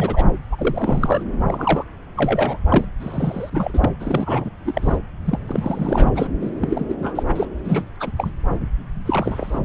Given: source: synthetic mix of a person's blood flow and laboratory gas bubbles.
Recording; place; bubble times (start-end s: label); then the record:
Doppler ultrasound of blood flow; subclavian vein
0.00-0.24 s: bubbles
0.51-1.23 s: bubbles
1.47-1.84 s: bubbles
2.15-2.57 s: bubbles
2.68-2.84 s: bubbles
3.00-3.90 s: bubbles
3.99-4.51 s: bubbles
4.66-4.99 s: bubbles
5.26-5.39 s: bubbles
5.47-6.12 s: bubbles
6.15-6.28 s: bubbles
6.40-6.51 s: bubbles
6.61-6.85 s: bubbles
6.89-6.95 s: bubbles
6.99-7.23 s: bubbles
7.36-7.49 s: bubbles
7.65-7.83 s: bubbles
8.00-8.11 s: bubbles
8.16-8.31 s: bubbles
9.05-9.60 s: bubbles
From the record:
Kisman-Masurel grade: 342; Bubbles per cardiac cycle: rolling drumbeat, 9 or more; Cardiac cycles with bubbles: 100%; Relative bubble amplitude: moderate (0.250 to 0.450); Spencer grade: 3 (all of the cardiac periods contain showers or single bubble signals, but not dominating or overriding the cardiac motion signals); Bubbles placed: anywhere in the cardiac cycle